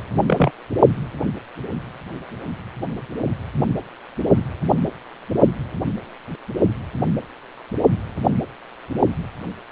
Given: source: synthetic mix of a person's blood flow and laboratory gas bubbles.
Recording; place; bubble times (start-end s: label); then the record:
Doppler ultrasound of blood flow; precordium
0.27-0.51 s: bubbles
From the record:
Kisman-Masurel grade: 113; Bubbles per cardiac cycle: 1 to 2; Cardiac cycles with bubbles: 1 to 10%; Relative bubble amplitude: loud (0.450 to 0.775); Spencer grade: 1 (occasional bubble signal discernible with the cardiac motion signal, with majority of cardiac periods free of bubbles); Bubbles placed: only in the low amplitude regions of the cardiac cycle